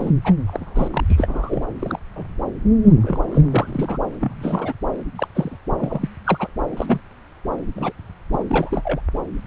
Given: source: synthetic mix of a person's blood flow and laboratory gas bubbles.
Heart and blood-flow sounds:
Doppler ultrasound of blood flow; subclavian vein
0.00-0.12 s: bubbles
0.24-0.33 s: bubbles
0.47-1.00 s: bubbles
1.09-1.65 s: bubbles
1.79-1.99 s: bubbles
2.16-2.24 s: bubbles
2.84-2.94 s: bubbles
3.02-3.19 s: bubbles
3.23-3.47 s: bubbles
3.50-3.99 s: bubbles
4.20-4.73 s: bubbles
5.18-5.28 s: bubbles
5.34-5.57 s: bubbles
5.79-6.09 s: bubbles
6.24-6.47 s: bubbles
6.76-7.00 s: bubbles
7.75-7.92 s: bubbles
8.33-8.43 s: bubbles
8.47-9.00 s: bubbles
From the record:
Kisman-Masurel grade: 242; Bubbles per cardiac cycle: several, 3 to 8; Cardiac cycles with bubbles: 100%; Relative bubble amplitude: moderate (0.250 to 0.450); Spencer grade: 3 (all of the cardiac periods contain showers or single bubble signals, but not dominating or overriding the cardiac motion signals); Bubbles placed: anywhere in the cardiac cycle

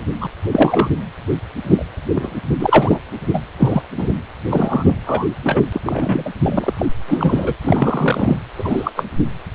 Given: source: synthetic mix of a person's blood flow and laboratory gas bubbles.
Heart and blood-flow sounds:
Doppler ultrasound of blood flow; precordium
0.20-0.28 s: bubbles
0.52-0.89 s: bubbles
1.66-1.84 s: bubbles
2.15-2.33 s: bubbles
2.59-3.00 s: bubbles
3.33-3.40 s: bubbles
3.58-3.82 s: bubbles
3.97-4.13 s: bubbles
4.50-4.95 s: bubbles
5.06-5.25 s: bubbles
5.44-5.63 s: bubbles
5.73-6.31 s: bubbles
6.42-6.74 s: bubbles
6.78-6.85 s: bubbles
7.08-7.55 s: bubbles
7.63-8.38 s: bubbles
8.57-8.92 s: bubbles
8.96-9.05 s: bubbles
From the record:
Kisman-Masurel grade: 243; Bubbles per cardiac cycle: several, 3 to 8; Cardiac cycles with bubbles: 100%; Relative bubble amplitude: loud (0.450 to 0.775); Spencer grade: 3 (all of the cardiac periods contain showers or single bubble signals, but not dominating or overriding the cardiac motion signals); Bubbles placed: anywhere in the cardiac cycle

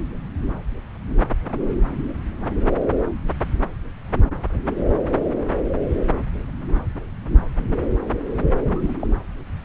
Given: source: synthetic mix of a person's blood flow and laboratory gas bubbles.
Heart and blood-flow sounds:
Doppler ultrasound of blood flow; subclavian vein
8.67-8.94 s: bubbles
9.00-9.07 s: bubbles
From the record:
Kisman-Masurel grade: 111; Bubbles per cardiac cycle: 1 to 2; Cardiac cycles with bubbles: 1 to 10%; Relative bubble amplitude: barely perceptible (0.100 to 0.250); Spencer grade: 1 (occasional bubble signal discernible with the cardiac motion signal, with majority of cardiac periods free of bubbles); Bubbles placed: anywhere in the cardiac cycle

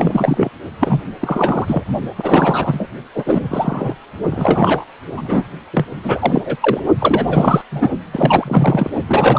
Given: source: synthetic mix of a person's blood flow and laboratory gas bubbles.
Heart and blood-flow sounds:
Doppler ultrasound of blood flow; precordium
0.00-0.50 s: bubbles
0.79-1.01 s: bubbles
1.21-1.84 s: bubbles
2.15-2.88 s: bubbles
3.14-3.95 s: bubbles
4.30-4.84 s: bubbles
5.17-5.46 s: bubbles
5.72-5.85 s: bubbles
6.03-6.42 s: bubbles
6.45-6.56 s: bubbles
6.60-6.80 s: bubbles
7.00-7.62 s: bubbles
7.71-7.91 s: bubbles
8.14-8.90 s: bubbles
9.06-9.39 s: bubbles
From the record:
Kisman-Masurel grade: 343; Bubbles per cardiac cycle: rolling drumbeat, 9 or more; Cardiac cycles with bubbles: 100%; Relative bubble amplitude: loud (0.450 to 0.775); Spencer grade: 3 (all of the cardiac periods contain showers or single bubble signals, but not dominating or overriding the cardiac motion signals); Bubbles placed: only in the low amplitude regions of the cardiac cycle

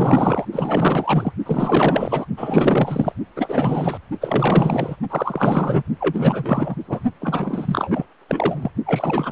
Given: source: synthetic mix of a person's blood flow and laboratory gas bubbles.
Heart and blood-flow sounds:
Doppler ultrasound of blood flow; precordium
0.00-0.45 s: bubbles
0.52-1.32 s: bubbles
1.46-2.25 s: bubbles
2.37-3.12 s: bubbles
3.35-3.98 s: bubbles
4.21-4.96 s: bubbles
5.10-5.83 s: bubbles
6.00-6.75 s: bubbles
6.87-7.03 s: bubbles
7.21-8.06 s: bubbles
8.29-8.71 s: bubbles
8.86-9.32 s: bubbles
From the record:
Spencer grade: 4 (maximum detectable bubble signal sounding continuously throughout systole and diastole of every cardiac period, and overriding the amplitude of the normal cardiac signals); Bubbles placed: only in the low amplitude regions of the cardiac cycle

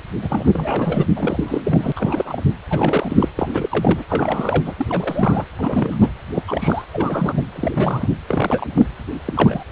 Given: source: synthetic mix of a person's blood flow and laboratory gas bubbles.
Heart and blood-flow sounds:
Doppler ultrasound of blood flow; precordium
0.22-1.06 s: bubbles
1.16-1.62 s: bubbles
1.65-1.92 s: bubbles
1.96-2.42 s: bubbles
2.69-3.29 s: bubbles
3.37-3.50 s: bubbles
3.52-4.04 s: bubbles
4.09-4.75 s: bubbles
4.77-4.87 s: bubbles
4.89-5.47 s: bubbles
5.56-6.10 s: bubbles
6.34-6.42 s: bubbles
6.47-6.84 s: bubbles
6.92-7.42 s: bubbles
7.55-7.71 s: bubbles
7.75-8.09 s: bubbles
8.28-8.67 s: bubbles
8.76-8.86 s: bubbles
9.25-9.63 s: bubbles
From the record:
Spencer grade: 3 (all of the cardiac periods contain showers or single bubble signals, but not dominating or overriding the cardiac motion signals); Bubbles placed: anywhere in the cardiac cycle

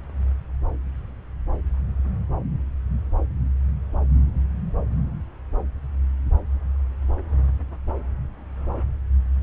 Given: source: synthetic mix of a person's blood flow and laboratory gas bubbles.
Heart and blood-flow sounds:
Doppler ultrasound of blood flow; subclavian vein
no bubbles
From the record:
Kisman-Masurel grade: 000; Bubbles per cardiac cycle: 0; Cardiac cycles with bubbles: 0%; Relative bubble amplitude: no bubbles discernible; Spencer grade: 0 (complete lack of bubble signals)

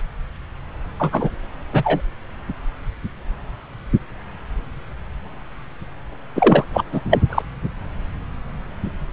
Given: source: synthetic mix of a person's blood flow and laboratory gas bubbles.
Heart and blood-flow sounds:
Doppler ultrasound of blood flow; subclavian vein
0.99-1.29 s: bubbles
1.73-2.01 s: bubbles
6.35-6.64 s: bubbles
6.73-6.84 s: bubbles
6.92-7.01 s: bubbles
7.10-7.19 s: bubbles
7.29-7.42 s: bubbles
From the record:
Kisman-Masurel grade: 223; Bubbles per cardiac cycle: several, 3 to 8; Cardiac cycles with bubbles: 10 to 50%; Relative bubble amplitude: loud (0.450 to 0.775); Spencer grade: 2 (many but less than half of the cardiac periods contain bubble signals, singularly or in groups); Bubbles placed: anywhere in the cardiac cycle

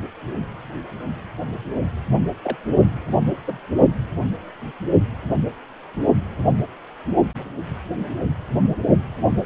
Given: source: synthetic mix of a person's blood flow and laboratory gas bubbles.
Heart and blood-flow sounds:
Doppler ultrasound of blood flow; precordium
2.43-2.56 s: bubbles
2.67-2.78 s: bubbles
3.46-3.58 s: bubbles
From the record:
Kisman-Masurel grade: 211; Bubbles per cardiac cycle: several, 3 to 8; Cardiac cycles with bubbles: 1 to 10%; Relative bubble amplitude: barely perceptible (0.100 to 0.250); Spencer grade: 1 (occasional bubble signal discernible with the cardiac motion signal, with majority of cardiac periods free of bubbles); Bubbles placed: only in the low amplitude regions of the cardiac cycle

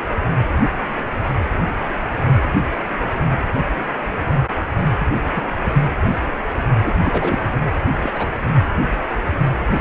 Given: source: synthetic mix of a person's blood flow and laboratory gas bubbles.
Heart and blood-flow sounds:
Doppler ultrasound of blood flow; precordium
5.34-5.42 s: bubbles
5.60-5.74 s: bubbles
6.83-6.93 s: bubbles
7.02-7.38 s: bubbles
7.97-8.28 s: bubbles
From the record:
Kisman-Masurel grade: 221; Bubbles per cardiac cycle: several, 3 to 8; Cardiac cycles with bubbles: 10 to 50%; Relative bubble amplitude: barely perceptible (0.100 to 0.250); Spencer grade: 2 (many but less than half of the cardiac periods contain bubble signals, singularly or in groups); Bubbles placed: anywhere in the cardiac cycle

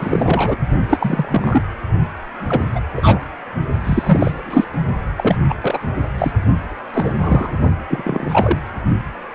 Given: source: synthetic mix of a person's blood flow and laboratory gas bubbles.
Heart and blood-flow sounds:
Doppler ultrasound of blood flow; precordium
0.00-0.56 s: bubbles
0.89-1.62 s: bubbles
2.48-2.64 s: bubbles
2.75-2.80 s: bubbles
2.96-3.20 s: bubbles
3.84-4.31 s: bubbles
4.33-4.66 s: bubbles
5.17-5.38 s: bubbles
5.48-5.54 s: bubbles
5.61-5.79 s: bubbles
6.18-6.32 s: bubbles
6.94-7.51 s: bubbles
7.90-8.58 s: bubbles
9.31-9.35 s: bubbles
From the record:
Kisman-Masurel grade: 243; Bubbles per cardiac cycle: several, 3 to 8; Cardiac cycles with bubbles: 100%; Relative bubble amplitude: loud (0.450 to 0.775); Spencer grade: 3 (all of the cardiac periods contain showers or single bubble signals, but not dominating or overriding the cardiac motion signals); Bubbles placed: only in the low amplitude regions of the cardiac cycle

